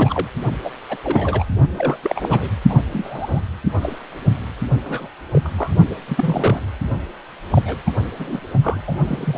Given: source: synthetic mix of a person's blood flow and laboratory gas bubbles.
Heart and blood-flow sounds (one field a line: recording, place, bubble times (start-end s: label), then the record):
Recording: Doppler ultrasound of blood flow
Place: precordium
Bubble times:
0.00-0.28 s: bubbles
0.64-0.70 s: bubbles
0.90-0.97 s: bubbles
1.04-1.45 s: bubbles
1.76-1.96 s: bubbles
2.02-2.48 s: bubbles
2.69-2.75 s: bubbles
2.86-3.40 s: bubbles
3.81-3.98 s: bubbles
4.83-5.08 s: bubbles
5.33-5.50 s: bubbles
5.58-5.75 s: bubbles
6.08-6.60 s: bubbles
7.50-7.76 s: bubbles
7.86-7.91 s: bubbles
8.18-8.40 s: bubbles
8.62-8.80 s: bubbles
8.87-8.95 s: bubbles
9.04-9.38 s: bubbles
From the record:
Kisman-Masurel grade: 242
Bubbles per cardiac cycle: several, 3 to 8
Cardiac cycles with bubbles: 100%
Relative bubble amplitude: moderate (0.250 to 0.450)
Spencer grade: 3 (all of the cardiac periods contain showers or single bubble signals, but not dominating or overriding the cardiac motion signals)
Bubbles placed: only in the low amplitude regions of the cardiac cycle